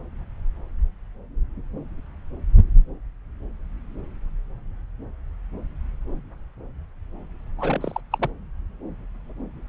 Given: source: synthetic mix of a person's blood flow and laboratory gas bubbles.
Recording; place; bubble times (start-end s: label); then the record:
Doppler ultrasound of blood flow; subclavian vein
7.58-8.00 s: bubbles
8.12-8.29 s: bubbles
From the record:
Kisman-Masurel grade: 212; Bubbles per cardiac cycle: several, 3 to 8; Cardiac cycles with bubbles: 1 to 10%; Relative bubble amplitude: moderate (0.250 to 0.450); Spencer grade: 1 (occasional bubble signal discernible with the cardiac motion signal, with majority of cardiac periods free of bubbles); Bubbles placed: anywhere in the cardiac cycle